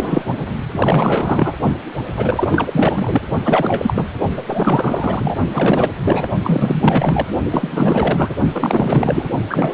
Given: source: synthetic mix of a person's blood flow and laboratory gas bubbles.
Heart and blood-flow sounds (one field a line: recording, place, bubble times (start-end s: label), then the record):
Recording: Doppler ultrasound of blood flow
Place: precordium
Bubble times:
0.00-0.24 s: bubbles
0.72-1.53 s: bubbles
2.16-3.21 s: bubbles
3.44-4.05 s: bubbles
4.36-5.38 s: bubbles
5.54-5.91 s: bubbles
6.04-6.27 s: bubbles
6.44-7.29 s: bubbles
7.51-8.36 s: bubbles
8.52-9.29 s: bubbles
9.49-9.74 s: bubbles
From the record:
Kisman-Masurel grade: 444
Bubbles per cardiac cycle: continuous sound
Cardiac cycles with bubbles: 100%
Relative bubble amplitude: maximal (0.775 to 0.999)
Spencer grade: 4 (maximum detectable bubble signal sounding continuously throughout systole and diastole of every cardiac period, and overriding the amplitude of the normal cardiac signals)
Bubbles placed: only in the low amplitude regions of the cardiac cycle